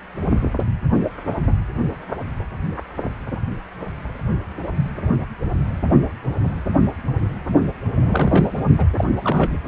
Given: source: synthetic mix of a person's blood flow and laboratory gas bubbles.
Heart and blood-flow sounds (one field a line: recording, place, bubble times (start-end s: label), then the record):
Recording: Doppler ultrasound of blood flow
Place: precordium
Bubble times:
7.95-8.48 s: bubbles
8.77-8.86 s: bubbles
8.96-9.04 s: bubbles
9.21-9.53 s: bubbles
From the record:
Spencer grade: 2 (many but less than half of the cardiac periods contain bubble signals, singularly or in groups)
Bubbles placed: only in the low amplitude regions of the cardiac cycle